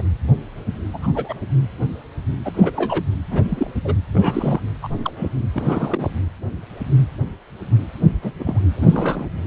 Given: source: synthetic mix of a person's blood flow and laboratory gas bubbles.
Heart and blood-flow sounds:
Doppler ultrasound of blood flow; precordium
0.00-0.03 s: bubbles
0.93-1.07 s: bubbles
1.13-1.34 s: bubbles
2.45-2.71 s: bubbles
2.76-3.04 s: bubbles
3.31-3.42 s: bubbles
3.49-3.71 s: bubbles
3.75-3.81 s: bubbles
3.84-3.95 s: bubbles
4.12-4.61 s: bubbles
4.82-4.88 s: bubbles
5.04-5.12 s: bubbles
5.17-5.29 s: bubbles
5.54-6.10 s: bubbles
8.22-8.33 s: bubbles
8.39-8.60 s: bubbles
8.76-9.26 s: bubbles
From the record:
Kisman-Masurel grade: 232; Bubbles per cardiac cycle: several, 3 to 8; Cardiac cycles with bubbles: 50 to 99%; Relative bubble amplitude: moderate (0.250 to 0.450); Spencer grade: 3 (all of the cardiac periods contain showers or single bubble signals, but not dominating or overriding the cardiac motion signals); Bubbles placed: anywhere in the cardiac cycle

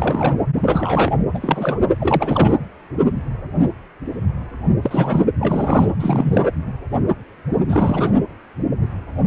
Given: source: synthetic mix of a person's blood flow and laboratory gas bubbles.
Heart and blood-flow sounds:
Doppler ultrasound of blood flow; precordium
0.00-0.36 s: bubbles
0.63-1.26 s: bubbles
1.33-1.80 s: bubbles
2.00-2.57 s: bubbles
4.82-5.26 s: bubbles
5.39-5.92 s: bubbles
5.99-6.52 s: bubbles
7.67-8.12 s: bubbles
From the record:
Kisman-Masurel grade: 333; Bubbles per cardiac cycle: rolling drumbeat, 9 or more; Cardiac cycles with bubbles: 50 to 99%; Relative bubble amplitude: loud (0.450 to 0.775); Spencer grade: 3 (all of the cardiac periods contain showers or single bubble signals, but not dominating or overriding the cardiac motion signals); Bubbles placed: anywhere in the cardiac cycle

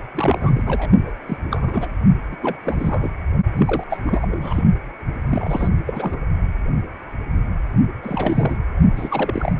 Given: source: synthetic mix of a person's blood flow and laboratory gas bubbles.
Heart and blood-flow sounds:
Doppler ultrasound of blood flow; precordium
0.14-1.15 s: bubbles
1.26-1.37 s: bubbles
1.50-1.89 s: bubbles
2.30-2.37 s: bubbles
2.42-2.56 s: bubbles
2.64-3.12 s: bubbles
3.57-3.84 s: bubbles
3.90-3.98 s: bubbles
4.06-4.62 s: bubbles
5.26-5.68 s: bubbles
5.86-6.16 s: bubbles
8.02-8.56 s: bubbles
8.96-9.55 s: bubbles
From the record:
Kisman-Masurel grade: 332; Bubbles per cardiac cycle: rolling drumbeat, 9 or more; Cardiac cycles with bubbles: 50 to 99%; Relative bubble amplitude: moderate (0.250 to 0.450); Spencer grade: 3 (all of the cardiac periods contain showers or single bubble signals, but not dominating or overriding the cardiac motion signals); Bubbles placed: only in the low amplitude regions of the cardiac cycle

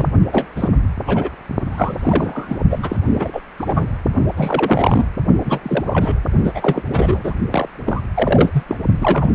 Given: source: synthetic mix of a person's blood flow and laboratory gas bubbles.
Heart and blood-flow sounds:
Doppler ultrasound of blood flow; precordium
0.00-0.08 s: bubbles
0.32-0.47 s: bubbles
0.56-0.69 s: bubbles
1.05-1.29 s: bubbles
1.69-2.58 s: bubbles
2.69-2.97 s: bubbles
3.10-3.42 s: bubbles
3.58-3.88 s: bubbles
4.37-5.06 s: bubbles
5.45-5.60 s: bubbles
5.63-6.20 s: bubbles
6.44-6.83 s: bubbles
6.90-7.34 s: bubbles
7.51-7.67 s: bubbles
7.85-8.03 s: bubbles
8.15-8.63 s: bubbles
8.67-8.77 s: bubbles
9.00-9.31 s: bubbles
From the record:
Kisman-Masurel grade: 343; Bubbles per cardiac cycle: rolling drumbeat, 9 or more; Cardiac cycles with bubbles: 100%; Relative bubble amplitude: loud (0.450 to 0.775); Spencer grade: 3 (all of the cardiac periods contain showers or single bubble signals, but not dominating or overriding the cardiac motion signals); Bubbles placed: only in the low amplitude regions of the cardiac cycle

